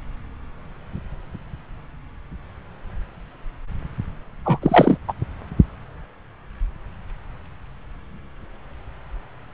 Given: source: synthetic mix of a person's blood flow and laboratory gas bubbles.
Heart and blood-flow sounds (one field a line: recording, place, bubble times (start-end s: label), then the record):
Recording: Doppler ultrasound of blood flow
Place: subclavian vein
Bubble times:
4.45-4.59 s: bubbles
4.62-4.97 s: bubbles
5.08-5.13 s: bubbles
From the record:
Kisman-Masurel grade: 213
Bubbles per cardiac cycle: several, 3 to 8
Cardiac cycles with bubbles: 1 to 10%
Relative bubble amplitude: loud (0.450 to 0.775)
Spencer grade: 1 (occasional bubble signal discernible with the cardiac motion signal, with majority of cardiac periods free of bubbles)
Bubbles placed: anywhere in the cardiac cycle